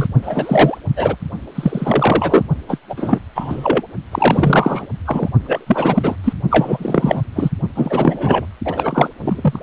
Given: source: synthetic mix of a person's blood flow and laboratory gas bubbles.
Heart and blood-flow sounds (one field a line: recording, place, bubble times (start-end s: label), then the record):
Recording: Doppler ultrasound of blood flow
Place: precordium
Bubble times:
0.00-0.07 s: bubbles
0.22-0.78 s: bubbles
0.96-1.17 s: bubbles
1.55-2.43 s: bubbles
2.69-2.78 s: bubbles
2.89-3.19 s: bubbles
3.35-3.82 s: bubbles
4.12-4.87 s: bubbles
5.05-5.29 s: bubbles
5.44-6.16 s: bubbles
6.24-6.33 s: bubbles
6.50-7.21 s: bubbles
7.35-7.50 s: bubbles
7.75-8.46 s: bubbles
8.65-9.09 s: bubbles
9.20-9.59 s: bubbles
From the record:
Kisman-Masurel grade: 343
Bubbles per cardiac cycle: rolling drumbeat, 9 or more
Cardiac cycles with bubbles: 100%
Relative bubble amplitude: loud (0.450 to 0.775)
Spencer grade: 3 (all of the cardiac periods contain showers or single bubble signals, but not dominating or overriding the cardiac motion signals)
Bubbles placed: only in the low amplitude regions of the cardiac cycle